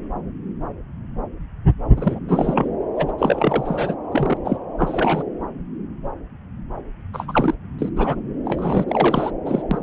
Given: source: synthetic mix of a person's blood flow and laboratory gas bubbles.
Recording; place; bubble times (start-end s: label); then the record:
Doppler ultrasound of blood flow; subclavian vein
1.96-2.19 s: bubbles
2.28-2.69 s: bubbles
2.95-3.12 s: bubbles
3.18-3.94 s: bubbles
4.12-4.38 s: bubbles
4.45-4.57 s: bubbles
4.78-5.23 s: bubbles
7.14-7.54 s: bubbles
7.79-7.90 s: bubbles
7.96-8.15 s: bubbles
8.45-8.85 s: bubbles
8.88-9.31 s: bubbles
9.45-9.62 s: bubbles
9.71-9.79 s: bubbles
From the record:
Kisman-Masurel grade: 332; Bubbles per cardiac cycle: rolling drumbeat, 9 or more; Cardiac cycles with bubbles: 50 to 99%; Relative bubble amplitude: moderate (0.250 to 0.450); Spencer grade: 3 (all of the cardiac periods contain showers or single bubble signals, but not dominating or overriding the cardiac motion signals); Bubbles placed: anywhere in the cardiac cycle